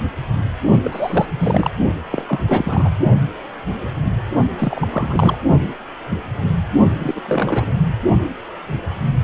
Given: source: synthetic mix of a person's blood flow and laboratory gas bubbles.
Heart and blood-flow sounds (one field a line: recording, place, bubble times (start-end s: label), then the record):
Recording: Doppler ultrasound of blood flow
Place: precordium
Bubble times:
0.82-1.25 s: bubbles
1.39-1.70 s: bubbles
2.10-2.25 s: bubbles
2.28-2.40 s: bubbles
2.47-2.90 s: bubbles
4.58-4.88 s: bubbles
4.91-5.38 s: bubbles
7.00-7.21 s: bubbles
7.25-7.71 s: bubbles
From the record:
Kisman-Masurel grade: 332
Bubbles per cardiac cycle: rolling drumbeat, 9 or more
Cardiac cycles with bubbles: 50 to 99%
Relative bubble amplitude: moderate (0.250 to 0.450)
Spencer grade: 3 (all of the cardiac periods contain showers or single bubble signals, but not dominating or overriding the cardiac motion signals)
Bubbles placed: only in the low amplitude regions of the cardiac cycle